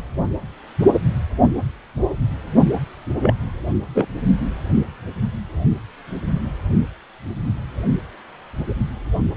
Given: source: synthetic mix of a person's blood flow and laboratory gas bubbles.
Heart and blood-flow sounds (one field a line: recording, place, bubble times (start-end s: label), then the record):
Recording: Doppler ultrasound of blood flow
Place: precordium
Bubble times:
3.21-3.33 s: bubbles
3.95-4.07 s: bubbles
From the record:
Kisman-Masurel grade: 112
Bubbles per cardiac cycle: 1 to 2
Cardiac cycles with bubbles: 1 to 10%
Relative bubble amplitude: moderate (0.250 to 0.450)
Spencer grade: 1 (occasional bubble signal discernible with the cardiac motion signal, with majority of cardiac periods free of bubbles)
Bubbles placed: only in the low amplitude regions of the cardiac cycle